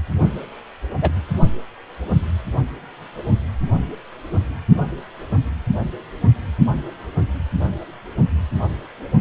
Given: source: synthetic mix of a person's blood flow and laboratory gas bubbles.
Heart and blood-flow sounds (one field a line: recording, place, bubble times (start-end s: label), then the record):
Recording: Doppler ultrasound of blood flow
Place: precordium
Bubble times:
1.02-1.10 s: bubbles
From the record:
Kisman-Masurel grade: 113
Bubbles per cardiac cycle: 1 to 2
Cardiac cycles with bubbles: 1 to 10%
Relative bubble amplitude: loud (0.450 to 0.775)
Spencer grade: 1 (occasional bubble signal discernible with the cardiac motion signal, with majority of cardiac periods free of bubbles)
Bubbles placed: only in the low amplitude regions of the cardiac cycle